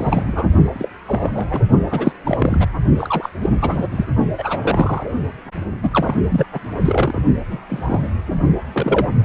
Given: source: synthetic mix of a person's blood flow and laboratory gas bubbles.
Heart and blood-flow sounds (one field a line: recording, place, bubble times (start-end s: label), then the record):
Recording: Doppler ultrasound of blood flow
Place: precordium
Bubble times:
0.00-0.47 s: bubbles
0.74-0.88 s: bubbles
1.05-1.31 s: bubbles
1.34-1.62 s: bubbles
1.90-2.13 s: bubbles
2.23-2.67 s: bubbles
2.98-3.29 s: bubbles
3.42-3.50 s: bubbles
3.60-3.84 s: bubbles
3.91-4.05 s: bubbles
4.38-5.14 s: bubbles
5.83-6.15 s: bubbles
6.29-6.46 s: bubbles
6.53-6.59 s: bubbles
6.84-7.22 s: bubbles
7.51-7.60 s: bubbles
7.69-8.09 s: bubbles
8.72-9.08 s: bubbles
From the record:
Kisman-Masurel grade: 242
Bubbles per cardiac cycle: several, 3 to 8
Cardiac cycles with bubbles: 100%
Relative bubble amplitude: moderate (0.250 to 0.450)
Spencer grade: 3 (all of the cardiac periods contain showers or single bubble signals, but not dominating or overriding the cardiac motion signals)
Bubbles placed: only in the low amplitude regions of the cardiac cycle